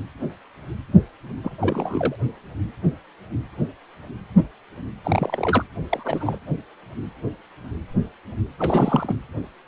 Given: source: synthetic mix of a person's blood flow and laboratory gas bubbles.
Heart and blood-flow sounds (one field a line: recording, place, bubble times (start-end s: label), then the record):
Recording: Doppler ultrasound of blood flow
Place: precordium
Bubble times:
1.44-1.56 s: bubbles
1.59-2.15 s: bubbles
5.04-5.64 s: bubbles
5.89-6.38 s: bubbles
8.59-9.15 s: bubbles
From the record:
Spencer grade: 2 (many but less than half of the cardiac periods contain bubble signals, singularly or in groups)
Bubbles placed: anywhere in the cardiac cycle